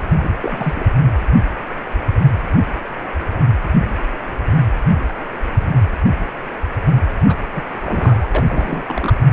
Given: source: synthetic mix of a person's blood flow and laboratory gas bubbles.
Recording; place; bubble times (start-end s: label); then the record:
Doppler ultrasound of blood flow; precordium
0.20-0.32 s: bubbles
0.41-0.86 s: bubbles
7.29-7.35 s: bubbles
7.53-7.64 s: bubbles
7.80-8.29 s: bubbles
8.35-8.44 s: bubbles
8.48-9.14 s: bubbles
From the record:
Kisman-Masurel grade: 222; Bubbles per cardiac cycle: several, 3 to 8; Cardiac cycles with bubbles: 10 to 50%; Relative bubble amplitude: moderate (0.250 to 0.450); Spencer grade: 2 (many but less than half of the cardiac periods contain bubble signals, singularly or in groups); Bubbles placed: anywhere in the cardiac cycle